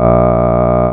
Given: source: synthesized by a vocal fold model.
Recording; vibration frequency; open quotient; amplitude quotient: sustained vowel; 60 Hz; 0.3; 1